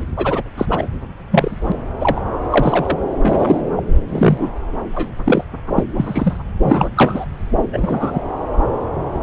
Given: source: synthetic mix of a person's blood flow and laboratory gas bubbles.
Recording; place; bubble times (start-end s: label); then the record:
Doppler ultrasound of blood flow; subclavian vein
0.16-0.42 s: bubbles
0.57-0.66 s: bubbles
0.70-0.88 s: bubbles
1.31-1.55 s: bubbles
1.68-1.72 s: bubbles
2.00-2.21 s: bubbles
2.50-2.98 s: bubbles
3.23-3.61 s: bubbles
3.76-3.83 s: bubbles
4.09-4.50 s: bubbles
4.92-5.11 s: bubbles
5.25-5.44 s: bubbles
5.75-5.83 s: bubbles
5.96-6.38 s: bubbles
6.62-6.89 s: bubbles
6.96-7.26 s: bubbles
7.73-8.20 s: bubbles
From the record:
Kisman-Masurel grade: 243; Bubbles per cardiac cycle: several, 3 to 8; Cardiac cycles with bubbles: 100%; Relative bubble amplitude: loud (0.450 to 0.775); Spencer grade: 3 (all of the cardiac periods contain showers or single bubble signals, but not dominating or overriding the cardiac motion signals); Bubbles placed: anywhere in the cardiac cycle